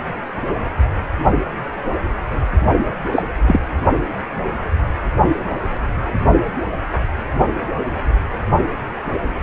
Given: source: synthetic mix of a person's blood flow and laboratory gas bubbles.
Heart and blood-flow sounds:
Doppler ultrasound of blood flow; precordium
3.11-3.23 s: bubbles
3.47-3.60 s: bubbles
From the record:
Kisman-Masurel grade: 113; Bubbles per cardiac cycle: 1 to 2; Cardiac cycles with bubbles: 1 to 10%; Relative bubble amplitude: loud (0.450 to 0.775); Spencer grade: 1 (occasional bubble signal discernible with the cardiac motion signal, with majority of cardiac periods free of bubbles); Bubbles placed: only in the low amplitude regions of the cardiac cycle

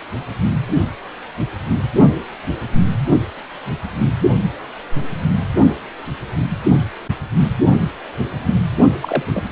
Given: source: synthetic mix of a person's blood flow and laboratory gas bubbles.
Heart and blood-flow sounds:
Doppler ultrasound of blood flow; precordium
9.01-9.25 s: bubbles
9.28-9.43 s: bubbles
From the record:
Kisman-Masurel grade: 122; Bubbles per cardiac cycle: 1 to 2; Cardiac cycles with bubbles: 10 to 50%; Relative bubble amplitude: moderate (0.250 to 0.450); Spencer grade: 2 (many but less than half of the cardiac periods contain bubble signals, singularly or in groups); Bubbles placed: only in the low amplitude regions of the cardiac cycle

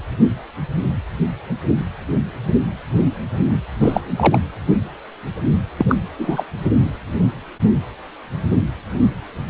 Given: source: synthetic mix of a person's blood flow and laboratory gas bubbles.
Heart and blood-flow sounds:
Doppler ultrasound of blood flow; precordium
3.81-4.00 s: bubbles
4.16-4.40 s: bubbles
5.77-5.86 s: bubbles
5.88-5.96 s: bubbles
6.18-6.43 s: bubbles
From the record:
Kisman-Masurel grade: 223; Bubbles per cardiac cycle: several, 3 to 8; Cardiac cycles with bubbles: 10 to 50%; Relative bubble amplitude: loud (0.450 to 0.775); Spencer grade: 2 (many but less than half of the cardiac periods contain bubble signals, singularly or in groups); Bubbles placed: anywhere in the cardiac cycle

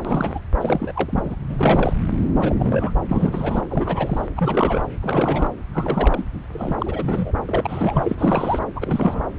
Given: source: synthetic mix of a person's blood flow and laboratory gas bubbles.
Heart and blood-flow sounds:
Doppler ultrasound of blood flow; subclavian vein
0.04-0.39 s: bubbles
0.61-0.93 s: bubbles
0.96-1.35 s: bubbles
1.49-1.96 s: bubbles
2.37-2.54 s: bubbles
2.59-2.93 s: bubbles
3.08-3.62 s: bubbles
3.69-4.27 s: bubbles
4.36-4.84 s: bubbles
5.01-5.50 s: bubbles
5.73-6.24 s: bubbles
6.53-7.31 s: bubbles
7.48-8.15 s: bubbles
8.18-8.59 s: bubbles
8.75-9.24 s: bubbles
9.36-9.39 s: bubbles
From the record:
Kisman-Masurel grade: 342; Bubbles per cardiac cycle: rolling drumbeat, 9 or more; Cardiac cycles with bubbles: 100%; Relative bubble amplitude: moderate (0.250 to 0.450); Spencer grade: 3 (all of the cardiac periods contain showers or single bubble signals, but not dominating or overriding the cardiac motion signals); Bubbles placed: anywhere in the cardiac cycle

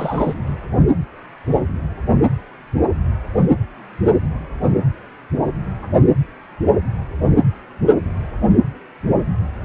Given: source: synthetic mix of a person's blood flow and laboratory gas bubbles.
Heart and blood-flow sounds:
Doppler ultrasound of blood flow; precordium
0.00-0.33 s: bubbles
From the record:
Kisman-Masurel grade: 213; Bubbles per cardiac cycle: several, 3 to 8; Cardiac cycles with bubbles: 1 to 10%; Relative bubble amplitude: loud (0.450 to 0.775); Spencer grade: 1 (occasional bubble signal discernible with the cardiac motion signal, with majority of cardiac periods free of bubbles); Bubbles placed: anywhere in the cardiac cycle

